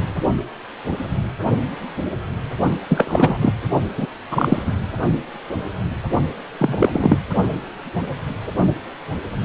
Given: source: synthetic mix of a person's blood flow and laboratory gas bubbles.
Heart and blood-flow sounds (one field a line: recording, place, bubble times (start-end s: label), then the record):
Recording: Doppler ultrasound of blood flow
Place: precordium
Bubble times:
2.89-3.39 s: bubbles
3.41-3.52 s: bubbles
3.97-4.06 s: bubbles
4.30-4.62 s: bubbles
4.66-4.73 s: bubbles
6.59-7.19 s: bubbles
From the record:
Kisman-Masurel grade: 223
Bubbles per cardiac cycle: several, 3 to 8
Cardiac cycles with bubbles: 10 to 50%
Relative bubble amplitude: loud (0.450 to 0.775)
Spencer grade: 2 (many but less than half of the cardiac periods contain bubble signals, singularly or in groups)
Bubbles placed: only in the low amplitude regions of the cardiac cycle